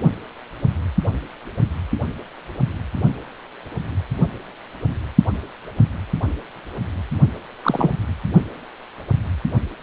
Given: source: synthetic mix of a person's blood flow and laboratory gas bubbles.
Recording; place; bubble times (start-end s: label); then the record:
Doppler ultrasound of blood flow; precordium
7.63-7.97 s: bubbles
From the record:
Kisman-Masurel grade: 222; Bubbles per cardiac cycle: several, 3 to 8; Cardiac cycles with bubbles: 10 to 50%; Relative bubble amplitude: moderate (0.250 to 0.450); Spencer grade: 2 (many but less than half of the cardiac periods contain bubble signals, singularly or in groups); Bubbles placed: only in the low amplitude regions of the cardiac cycle